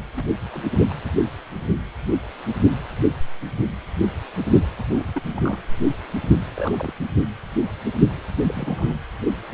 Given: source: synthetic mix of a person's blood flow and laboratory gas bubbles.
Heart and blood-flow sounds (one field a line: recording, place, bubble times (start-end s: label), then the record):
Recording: Doppler ultrasound of blood flow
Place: precordium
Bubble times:
0.13-0.32 s: bubbles
0.52-0.65 s: bubbles
0.89-0.94 s: bubbles
4.90-5.12 s: bubbles
5.15-5.22 s: bubbles
5.34-5.67 s: bubbles
6.56-6.93 s: bubbles
8.40-8.96 s: bubbles
From the record:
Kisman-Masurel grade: 221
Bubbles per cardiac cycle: several, 3 to 8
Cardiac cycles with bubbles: 10 to 50%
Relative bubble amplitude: barely perceptible (0.100 to 0.250)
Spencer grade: 2 (many but less than half of the cardiac periods contain bubble signals, singularly or in groups)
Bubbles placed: anywhere in the cardiac cycle